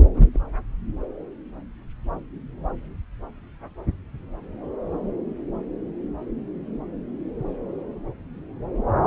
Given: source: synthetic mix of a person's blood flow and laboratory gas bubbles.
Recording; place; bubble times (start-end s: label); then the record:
Doppler ultrasound of blood flow; subclavian vein
0.14-0.22 s: bubbles
0.33-0.41 s: bubbles
From the record:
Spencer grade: 1 (occasional bubble signal discernible with the cardiac motion signal, with majority of cardiac periods free of bubbles); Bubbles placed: anywhere in the cardiac cycle